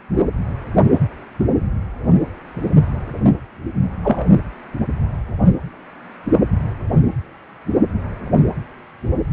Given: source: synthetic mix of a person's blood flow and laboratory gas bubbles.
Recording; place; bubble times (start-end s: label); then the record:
Doppler ultrasound of blood flow; precordium
4.04-4.25 s: bubbles
From the record:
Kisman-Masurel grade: 113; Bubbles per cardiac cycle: 1 to 2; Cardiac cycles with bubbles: 1 to 10%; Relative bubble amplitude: loud (0.450 to 0.775); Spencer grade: 1 (occasional bubble signal discernible with the cardiac motion signal, with majority of cardiac periods free of bubbles); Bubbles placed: anywhere in the cardiac cycle